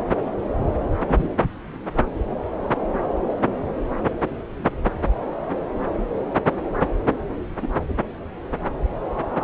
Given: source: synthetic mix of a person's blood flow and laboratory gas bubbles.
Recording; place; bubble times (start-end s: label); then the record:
Doppler ultrasound of blood flow; subclavian vein
1.07-1.28 s: bubbles
2.30-2.37 s: bubbles
7.61-7.67 s: bubbles
From the record:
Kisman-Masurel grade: 122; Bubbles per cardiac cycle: 1 to 2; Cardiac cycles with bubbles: 10 to 50%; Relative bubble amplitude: moderate (0.250 to 0.450); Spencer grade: 2 (many but less than half of the cardiac periods contain bubble signals, singularly or in groups); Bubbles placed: anywhere in the cardiac cycle